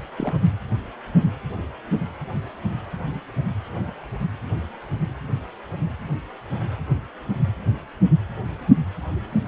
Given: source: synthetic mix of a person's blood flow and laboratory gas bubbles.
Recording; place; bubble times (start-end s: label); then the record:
Doppler ultrasound of blood flow; precordium
0.18-0.34 s: bubbles
From the record:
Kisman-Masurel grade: 111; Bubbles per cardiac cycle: 1 to 2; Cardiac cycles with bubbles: 1 to 10%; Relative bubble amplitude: barely perceptible (0.100 to 0.250); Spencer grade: 1 (occasional bubble signal discernible with the cardiac motion signal, with majority of cardiac periods free of bubbles); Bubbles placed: anywhere in the cardiac cycle